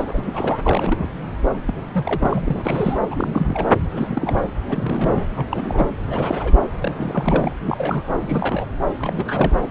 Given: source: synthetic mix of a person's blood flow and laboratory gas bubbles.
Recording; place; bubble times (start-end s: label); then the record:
Doppler ultrasound of blood flow; subclavian vein
0.00-0.23 s: bubbles
0.27-0.58 s: bubbles
0.62-1.08 s: bubbles
1.65-1.74 s: bubbles
1.92-2.98 s: bubbles
3.10-3.67 s: bubbles
3.94-4.39 s: bubbles
4.62-5.46 s: bubbles
5.49-5.94 s: bubbles
6.05-6.60 s: bubbles
6.78-7.53 s: bubbles
7.65-8.07 s: bubbles
8.20-8.66 s: bubbles
8.98-9.55 s: bubbles
From the record:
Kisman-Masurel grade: 342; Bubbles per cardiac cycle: rolling drumbeat, 9 or more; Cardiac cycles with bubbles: 100%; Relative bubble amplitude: moderate (0.250 to 0.450); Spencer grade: 3 (all of the cardiac periods contain showers or single bubble signals, but not dominating or overriding the cardiac motion signals); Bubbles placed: anywhere in the cardiac cycle